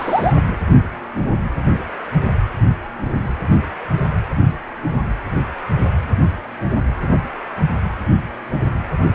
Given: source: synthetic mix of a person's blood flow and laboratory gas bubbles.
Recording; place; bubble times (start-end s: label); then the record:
Doppler ultrasound of blood flow; precordium
0.00-0.34 s: bubbles
From the record:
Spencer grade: 1 (occasional bubble signal discernible with the cardiac motion signal, with majority of cardiac periods free of bubbles); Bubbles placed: anywhere in the cardiac cycle